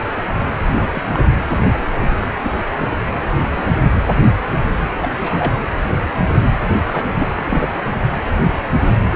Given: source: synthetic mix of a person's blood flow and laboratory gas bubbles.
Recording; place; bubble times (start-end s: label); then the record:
Doppler ultrasound of blood flow; precordium
0.67-1.08 s: bubbles
1.13-1.20 s: bubbles
1.79-2.08 s: bubbles
2.42-2.52 s: bubbles
2.79-2.93 s: bubbles
3.14-3.21 s: bubbles
3.43-3.48 s: bubbles
3.51-3.62 s: bubbles
5.02-5.08 s: bubbles
5.21-5.55 s: bubbles
6.92-7.04 s: bubbles
7.11-7.27 s: bubbles
7.35-7.77 s: bubbles
From the record:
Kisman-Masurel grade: 232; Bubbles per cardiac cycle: several, 3 to 8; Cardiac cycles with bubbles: 50 to 99%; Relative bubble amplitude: moderate (0.250 to 0.450); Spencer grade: 3 (all of the cardiac periods contain showers or single bubble signals, but not dominating or overriding the cardiac motion signals); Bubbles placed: anywhere in the cardiac cycle